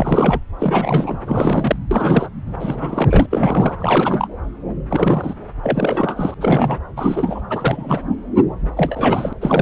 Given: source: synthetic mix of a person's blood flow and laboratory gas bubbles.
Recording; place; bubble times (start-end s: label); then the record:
Doppler ultrasound of blood flow; subclavian vein
0.00-0.40 s: bubbles
0.58-1.19 s: bubbles
1.26-1.76 s: bubbles
1.91-2.29 s: bubbles
2.59-3.26 s: bubbles
3.30-3.75 s: bubbles
3.79-4.27 s: bubbles
4.90-5.34 s: bubbles
5.62-6.34 s: bubbles
6.41-6.76 s: bubbles
6.96-7.41 s: bubbles
7.50-8.02 s: bubbles
8.77-9.33 s: bubbles
9.42-9.62 s: bubbles
From the record:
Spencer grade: 3 (all of the cardiac periods contain showers or single bubble signals, but not dominating or overriding the cardiac motion signals); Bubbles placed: anywhere in the cardiac cycle